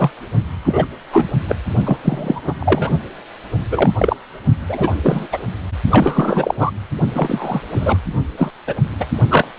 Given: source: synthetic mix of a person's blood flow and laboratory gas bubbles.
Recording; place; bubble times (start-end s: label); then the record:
Doppler ultrasound of blood flow; precordium
0.00-0.10 s: bubbles
0.65-0.85 s: bubbles
1.12-1.28 s: bubbles
1.47-1.56 s: bubbles
1.84-1.98 s: bubbles
2.02-2.40 s: bubbles
2.44-2.54 s: bubbles
2.59-2.90 s: bubbles
3.71-3.91 s: bubbles
3.99-4.15 s: bubbles
4.68-4.92 s: bubbles
5.01-5.28 s: bubbles
5.32-5.39 s: bubbles
5.91-6.55 s: bubbles
6.58-6.71 s: bubbles
7.14-7.61 s: bubbles
7.75-7.98 s: bubbles
8.38-8.51 s: bubbles
8.67-8.75 s: bubbles
9.00-9.06 s: bubbles
9.30-9.47 s: bubbles
From the record:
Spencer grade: 3 (all of the cardiac periods contain showers or single bubble signals, but not dominating or overriding the cardiac motion signals); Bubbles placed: only in the low amplitude regions of the cardiac cycle